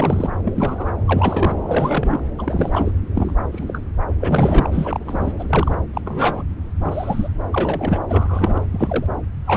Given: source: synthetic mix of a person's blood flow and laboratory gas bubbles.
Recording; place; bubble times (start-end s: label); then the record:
Doppler ultrasound of blood flow; subclavian vein
0.00-0.30 s: bubbles
0.44-0.92 s: bubbles
1.05-1.56 s: bubbles
1.69-2.20 s: bubbles
2.38-2.92 s: bubbles
3.14-3.35 s: bubbles
3.52-3.81 s: bubbles
4.20-5.33 s: bubbles
5.38-5.79 s: bubbles
5.93-6.01 s: bubbles
6.05-6.43 s: bubbles
6.80-7.29 s: bubbles
7.51-8.00 s: bubbles
8.08-8.61 s: bubbles
8.71-9.06 s: bubbles
9.46-9.57 s: bubbles
From the record:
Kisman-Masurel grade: 243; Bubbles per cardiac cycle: several, 3 to 8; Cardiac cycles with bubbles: 100%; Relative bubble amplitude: loud (0.450 to 0.775); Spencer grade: 3 (all of the cardiac periods contain showers or single bubble signals, but not dominating or overriding the cardiac motion signals); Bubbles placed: anywhere in the cardiac cycle